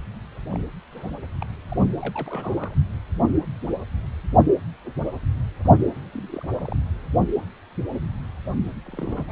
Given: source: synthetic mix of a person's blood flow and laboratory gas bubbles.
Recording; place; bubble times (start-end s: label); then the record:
Doppler ultrasound of blood flow; precordium
0.00-0.03 s: bubbles
0.52-0.58 s: bubbles
0.91-1.10 s: bubbles
1.41-1.45 s: bubbles
1.68-1.77 s: bubbles
1.97-2.75 s: bubbles
6.12-6.75 s: bubbles
8.85-9.32 s: bubbles
From the record:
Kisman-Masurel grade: 221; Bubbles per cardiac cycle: several, 3 to 8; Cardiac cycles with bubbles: 10 to 50%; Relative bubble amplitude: barely perceptible (0.100 to 0.250); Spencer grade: 2 (many but less than half of the cardiac periods contain bubble signals, singularly or in groups); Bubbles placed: only in the low amplitude regions of the cardiac cycle